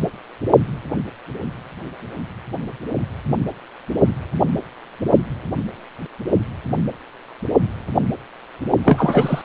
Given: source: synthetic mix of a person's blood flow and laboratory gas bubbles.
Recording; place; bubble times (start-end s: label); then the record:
Doppler ultrasound of blood flow; precordium
8.85-9.42 s: bubbles
From the record:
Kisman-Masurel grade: 213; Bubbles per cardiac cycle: several, 3 to 8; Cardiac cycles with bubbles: 1 to 10%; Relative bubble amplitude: loud (0.450 to 0.775); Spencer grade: 1 (occasional bubble signal discernible with the cardiac motion signal, with majority of cardiac periods free of bubbles); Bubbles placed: only in the low amplitude regions of the cardiac cycle